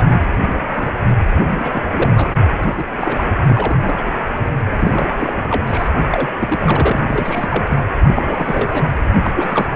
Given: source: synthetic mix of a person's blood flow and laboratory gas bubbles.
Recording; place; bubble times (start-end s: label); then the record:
Doppler ultrasound of blood flow; precordium
0.00-0.04 s: bubbles
0.07-0.26 s: bubbles
0.73-0.90 s: bubbles
1.50-2.33 s: bubbles
2.63-3.32 s: bubbles
3.48-4.14 s: bubbles
4.33-4.49 s: bubbles
4.74-5.88 s: bubbles
6.09-6.31 s: bubbles
6.39-6.99 s: bubbles
7.07-7.63 s: bubbles
7.68-7.82 s: bubbles
7.98-8.91 s: bubbles
9.23-9.68 s: bubbles
9.72-9.76 s: bubbles
From the record:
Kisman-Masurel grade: 342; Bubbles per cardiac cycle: rolling drumbeat, 9 or more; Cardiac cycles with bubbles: 100%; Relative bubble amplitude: moderate (0.250 to 0.450); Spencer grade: 3 (all of the cardiac periods contain showers or single bubble signals, but not dominating or overriding the cardiac motion signals); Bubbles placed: anywhere in the cardiac cycle